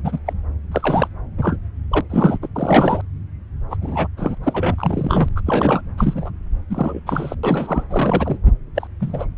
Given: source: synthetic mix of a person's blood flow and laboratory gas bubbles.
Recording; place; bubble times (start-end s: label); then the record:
Doppler ultrasound of blood flow; subclavian vein
0.03-0.19 s: bubbles
0.26-0.33 s: bubbles
0.71-1.08 s: bubbles
1.37-1.58 s: bubbles
1.91-2.01 s: bubbles
2.09-2.38 s: bubbles
2.42-2.48 s: bubbles
2.55-3.01 s: bubbles
3.69-3.77 s: bubbles
3.81-4.08 s: bubbles
4.17-4.38 s: bubbles
4.43-5.29 s: bubbles
5.36-5.41 s: bubbles
5.46-5.81 s: bubbles
5.98-6.31 s: bubbles
6.70-7.00 s: bubbles
7.06-7.35 s: bubbles
7.43-7.85 s: bubbles
7.90-8.37 s: bubbles
8.75-8.88 s: bubbles
9.00-9.27 s: bubbles
From the record:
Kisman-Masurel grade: 233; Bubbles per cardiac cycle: several, 3 to 8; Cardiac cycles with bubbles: 50 to 99%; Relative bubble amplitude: loud (0.450 to 0.775); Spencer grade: 3 (all of the cardiac periods contain showers or single bubble signals, but not dominating or overriding the cardiac motion signals); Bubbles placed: anywhere in the cardiac cycle